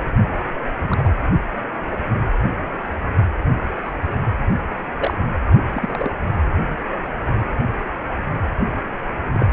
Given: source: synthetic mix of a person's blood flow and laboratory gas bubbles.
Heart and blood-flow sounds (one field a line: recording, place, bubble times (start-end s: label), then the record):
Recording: Doppler ultrasound of blood flow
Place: precordium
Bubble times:
0.76-1.13 s: bubbles
3.85-3.92 s: bubbles
4.98-5.14 s: bubbles
5.73-6.11 s: bubbles
6.88-7.00 s: bubbles
9.34-9.46 s: bubbles
From the record:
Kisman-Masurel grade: 122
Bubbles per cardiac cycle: 1 to 2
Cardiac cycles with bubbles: 10 to 50%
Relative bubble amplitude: moderate (0.250 to 0.450)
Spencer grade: 2 (many but less than half of the cardiac periods contain bubble signals, singularly or in groups)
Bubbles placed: only in the low amplitude regions of the cardiac cycle